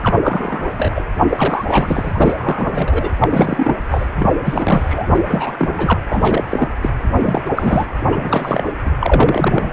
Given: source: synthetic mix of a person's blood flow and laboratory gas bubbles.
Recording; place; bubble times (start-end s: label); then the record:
Doppler ultrasound of blood flow; precordium
0.03-0.16 s: bubbles
0.23-0.71 s: bubbles
0.77-0.92 s: bubbles
0.94-1.03 s: bubbles
1.28-1.65 s: bubbles
1.67-3.10 s: bubbles
3.20-3.28 s: bubbles
3.31-3.74 s: bubbles
3.91-4.07 s: bubbles
4.15-5.08 s: bubbles
5.16-5.23 s: bubbles
5.29-6.00 s: bubbles
6.10-6.44 s: bubbles
6.50-6.68 s: bubbles
6.82-6.90 s: bubbles
7.19-7.42 s: bubbles
7.45-7.50 s: bubbles
7.55-7.86 s: bubbles
8.12-8.63 s: bubbles
8.66-8.76 s: bubbles
8.85-8.91 s: bubbles
9.00-9.73 s: bubbles
From the record:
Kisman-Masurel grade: 343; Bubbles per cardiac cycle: rolling drumbeat, 9 or more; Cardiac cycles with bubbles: 100%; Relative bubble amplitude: loud (0.450 to 0.775); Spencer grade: 3 (all of the cardiac periods contain showers or single bubble signals, but not dominating or overriding the cardiac motion signals); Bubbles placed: anywhere in the cardiac cycle